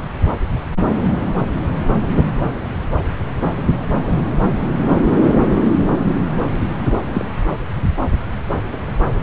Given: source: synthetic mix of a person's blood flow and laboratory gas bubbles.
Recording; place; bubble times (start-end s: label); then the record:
Doppler ultrasound of blood flow; subclavian vein
7.14-7.25 s: bubbles
8.66-8.77 s: bubbles
From the record:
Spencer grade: 2 (many but less than half of the cardiac periods contain bubble signals, singularly or in groups); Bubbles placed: anywhere in the cardiac cycle